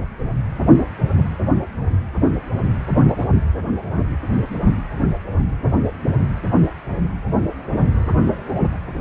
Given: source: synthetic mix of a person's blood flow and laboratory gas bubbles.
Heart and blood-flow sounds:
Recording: Doppler ultrasound of blood flow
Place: precordium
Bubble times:
3.10-3.27 s: bubbles
3.98-4.03 s: bubbles
From the record:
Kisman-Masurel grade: 121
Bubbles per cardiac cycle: 1 to 2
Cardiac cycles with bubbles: 10 to 50%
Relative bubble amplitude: barely perceptible (0.100 to 0.250)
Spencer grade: 2 (many but less than half of the cardiac periods contain bubble signals, singularly or in groups)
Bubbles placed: anywhere in the cardiac cycle

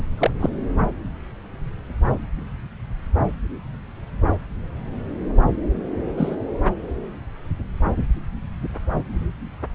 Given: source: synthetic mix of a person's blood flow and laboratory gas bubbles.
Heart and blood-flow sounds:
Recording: Doppler ultrasound of blood flow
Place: subclavian vein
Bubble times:
0.18-0.30 s: bubbles
0.41-0.49 s: bubbles
6.17-6.37 s: bubbles
From the record:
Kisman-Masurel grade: 122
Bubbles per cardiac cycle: 1 to 2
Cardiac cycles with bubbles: 10 to 50%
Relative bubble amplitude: moderate (0.250 to 0.450)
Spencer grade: 2 (many but less than half of the cardiac periods contain bubble signals, singularly or in groups)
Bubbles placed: anywhere in the cardiac cycle

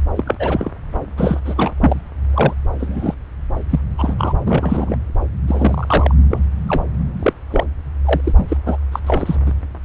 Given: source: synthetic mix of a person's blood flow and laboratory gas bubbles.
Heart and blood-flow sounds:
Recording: Doppler ultrasound of blood flow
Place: subclavian vein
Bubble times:
0.15-0.35 s: bubbles
0.39-0.71 s: bubbles
1.17-1.40 s: bubbles
1.45-1.71 s: bubbles
1.80-2.01 s: bubbles
2.34-2.54 s: bubbles
2.79-3.15 s: bubbles
3.69-3.79 s: bubbles
3.98-4.16 s: bubbles
4.18-4.33 s: bubbles
4.46-4.96 s: bubbles
5.47-6.15 s: bubbles
6.31-6.40 s: bubbles
6.67-6.84 s: bubbles
7.19-7.33 s: bubbles
7.51-7.64 s: bubbles
8.05-8.21 s: bubbles
8.24-8.33 s: bubbles
8.37-8.57 s: bubbles
8.66-8.77 s: bubbles
8.92-9.00 s: bubbles
9.06-9.36 s: bubbles
9.46-9.52 s: bubbles
From the record:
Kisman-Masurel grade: 243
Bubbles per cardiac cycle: several, 3 to 8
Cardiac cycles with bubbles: 100%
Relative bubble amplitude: loud (0.450 to 0.775)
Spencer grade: 3 (all of the cardiac periods contain showers or single bubble signals, but not dominating or overriding the cardiac motion signals)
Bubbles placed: anywhere in the cardiac cycle

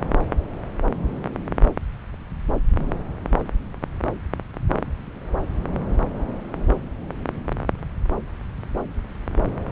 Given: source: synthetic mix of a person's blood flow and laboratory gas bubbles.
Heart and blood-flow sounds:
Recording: Doppler ultrasound of blood flow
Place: subclavian vein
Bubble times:
no bubbles
From the record:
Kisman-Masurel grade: 000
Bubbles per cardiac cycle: 0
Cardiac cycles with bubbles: 0%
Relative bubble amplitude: no bubbles discernible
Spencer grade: 0 (complete lack of bubble signals)

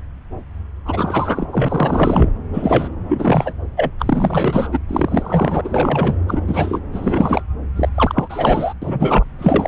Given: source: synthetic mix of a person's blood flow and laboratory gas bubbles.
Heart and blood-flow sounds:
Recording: Doppler ultrasound of blood flow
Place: subclavian vein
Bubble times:
0.85-1.47 s: bubbles
1.51-2.29 s: bubbles
2.53-2.88 s: bubbles
3.09-3.54 s: bubbles
3.77-3.91 s: bubbles
3.98-4.69 s: bubbles
4.72-4.80 s: bubbles
4.89-5.61 s: bubbles
5.64-6.16 s: bubbles
6.28-6.43 s: bubbles
6.48-6.80 s: bubbles
6.92-7.43 s: bubbles
7.76-7.89 s: bubbles
7.95-8.74 s: bubbles
8.82-9.26 s: bubbles
9.38-9.68 s: bubbles
From the record:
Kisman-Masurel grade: 333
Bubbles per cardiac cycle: rolling drumbeat, 9 or more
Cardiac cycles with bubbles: 50 to 99%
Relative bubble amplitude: loud (0.450 to 0.775)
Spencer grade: 3 (all of the cardiac periods contain showers or single bubble signals, but not dominating or overriding the cardiac motion signals)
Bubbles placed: anywhere in the cardiac cycle

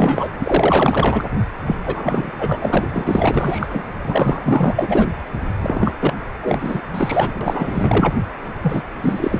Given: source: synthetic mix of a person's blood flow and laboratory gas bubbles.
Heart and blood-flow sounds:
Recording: Doppler ultrasound of blood flow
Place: precordium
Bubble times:
0.00-0.30 s: bubbles
0.39-1.28 s: bubbles
1.66-1.76 s: bubbles
1.85-2.31 s: bubbles
2.38-3.84 s: bubbles
4.05-5.08 s: bubbles
5.61-5.94 s: bubbles
6.00-6.13 s: bubbles
6.42-6.82 s: bubbles
6.92-7.32 s: bubbles
7.41-8.14 s: bubbles
8.61-8.82 s: bubbles
9.01-9.40 s: bubbles
From the record:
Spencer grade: 4 (maximum detectable bubble signal sounding continuously throughout systole and diastole of every cardiac period, and overriding the amplitude of the normal cardiac signals)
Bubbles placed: anywhere in the cardiac cycle

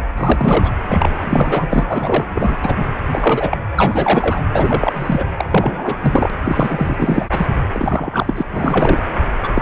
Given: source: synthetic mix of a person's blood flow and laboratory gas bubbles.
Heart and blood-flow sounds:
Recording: Doppler ultrasound of blood flow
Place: precordium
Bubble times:
0.17-0.70 s: bubbles
0.89-1.68 s: bubbles
1.71-2.26 s: bubbles
2.35-2.58 s: bubbles
2.62-2.85 s: bubbles
3.09-3.58 s: bubbles
3.76-4.42 s: bubbles
4.53-5.26 s: bubbles
5.37-5.96 s: bubbles
6.01-6.34 s: bubbles
6.44-6.95 s: bubbles
6.98-7.46 s: bubbles
7.74-8.43 s: bubbles
8.51-9.01 s: bubbles
9.43-9.49 s: bubbles
9.55-9.62 s: bubbles
From the record:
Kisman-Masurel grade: 343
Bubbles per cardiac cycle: rolling drumbeat, 9 or more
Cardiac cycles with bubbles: 100%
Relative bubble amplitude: loud (0.450 to 0.775)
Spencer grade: 3 (all of the cardiac periods contain showers or single bubble signals, but not dominating or overriding the cardiac motion signals)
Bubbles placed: anywhere in the cardiac cycle

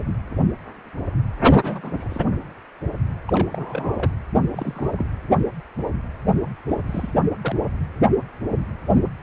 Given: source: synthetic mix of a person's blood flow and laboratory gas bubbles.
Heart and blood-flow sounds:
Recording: Doppler ultrasound of blood flow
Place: precordium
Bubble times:
1.43-1.57 s: bubbles
1.62-2.08 s: bubbles
2.10-2.21 s: bubbles
3.28-3.48 s: bubbles
3.50-4.12 s: bubbles
4.53-5.06 s: bubbles
6.70-6.78 s: bubbles
6.87-7.12 s: bubbles
7.41-7.55 s: bubbles
From the record:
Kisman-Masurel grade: 221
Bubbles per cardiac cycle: several, 3 to 8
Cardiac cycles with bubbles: 10 to 50%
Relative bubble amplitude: barely perceptible (0.100 to 0.250)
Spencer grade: 2 (many but less than half of the cardiac periods contain bubble signals, singularly or in groups)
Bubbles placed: anywhere in the cardiac cycle

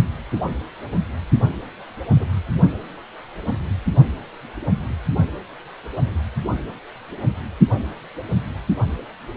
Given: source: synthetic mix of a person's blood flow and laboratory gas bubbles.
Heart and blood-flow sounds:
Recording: Doppler ultrasound of blood flow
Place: precordium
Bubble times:
2.17-2.29 s: bubbles
From the record:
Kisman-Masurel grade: 111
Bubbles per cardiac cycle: 1 to 2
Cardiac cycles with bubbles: 1 to 10%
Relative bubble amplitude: barely perceptible (0.100 to 0.250)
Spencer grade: 1 (occasional bubble signal discernible with the cardiac motion signal, with majority of cardiac periods free of bubbles)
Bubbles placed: only in the low amplitude regions of the cardiac cycle

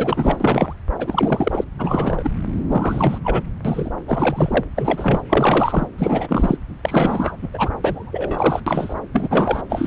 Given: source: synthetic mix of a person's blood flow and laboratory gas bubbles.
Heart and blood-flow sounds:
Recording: Doppler ultrasound of blood flow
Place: subclavian vein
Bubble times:
0.00-0.73 s: bubbles
0.98-1.65 s: bubbles
1.79-2.31 s: bubbles
2.68-3.19 s: bubbles
3.24-3.41 s: bubbles
3.65-3.91 s: bubbles
4.07-4.65 s: bubbles
4.76-5.21 s: bubbles
5.29-5.87 s: bubbles
5.97-6.57 s: bubbles
6.82-7.36 s: bubbles
7.42-7.49 s: bubbles
7.54-7.70 s: bubbles
7.84-8.61 s: bubbles
8.66-8.94 s: bubbles
9.13-9.62 s: bubbles
9.70-9.87 s: bubbles
From the record:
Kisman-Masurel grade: 343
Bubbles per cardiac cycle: rolling drumbeat, 9 or more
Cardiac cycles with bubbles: 100%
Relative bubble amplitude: loud (0.450 to 0.775)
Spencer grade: 3 (all of the cardiac periods contain showers or single bubble signals, but not dominating or overriding the cardiac motion signals)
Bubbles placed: anywhere in the cardiac cycle

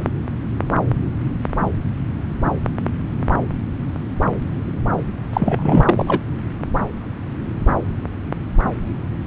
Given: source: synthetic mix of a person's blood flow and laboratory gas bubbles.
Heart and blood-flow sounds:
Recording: Doppler ultrasound of blood flow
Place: subclavian vein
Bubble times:
5.33-6.21 s: bubbles
From the record:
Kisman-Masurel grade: 213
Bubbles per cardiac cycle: several, 3 to 8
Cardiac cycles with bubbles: 1 to 10%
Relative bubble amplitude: loud (0.450 to 0.775)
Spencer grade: 1 (occasional bubble signal discernible with the cardiac motion signal, with majority of cardiac periods free of bubbles)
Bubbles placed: anywhere in the cardiac cycle

